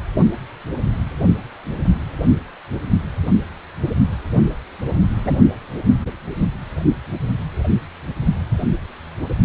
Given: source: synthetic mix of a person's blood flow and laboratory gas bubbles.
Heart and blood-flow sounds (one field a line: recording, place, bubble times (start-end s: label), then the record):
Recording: Doppler ultrasound of blood flow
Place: precordium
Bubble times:
5.24-5.36 s: bubbles
From the record:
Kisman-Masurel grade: 123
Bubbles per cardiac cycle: 1 to 2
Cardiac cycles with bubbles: 10 to 50%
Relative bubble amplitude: loud (0.450 to 0.775)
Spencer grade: 2 (many but less than half of the cardiac periods contain bubble signals, singularly or in groups)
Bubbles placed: only in the low amplitude regions of the cardiac cycle